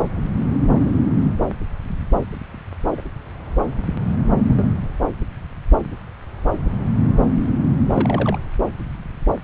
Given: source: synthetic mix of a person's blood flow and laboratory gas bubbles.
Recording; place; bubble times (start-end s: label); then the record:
Doppler ultrasound of blood flow; subclavian vein
0.82-0.91 s: bubbles
2.97-3.02 s: bubbles
4.49-4.63 s: bubbles
7.92-8.38 s: bubbles
From the record:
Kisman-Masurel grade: 121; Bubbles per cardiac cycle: 1 to 2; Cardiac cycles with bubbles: 10 to 50%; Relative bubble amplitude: barely perceptible (0.100 to 0.250); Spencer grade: 2 (many but less than half of the cardiac periods contain bubble signals, singularly or in groups); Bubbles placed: anywhere in the cardiac cycle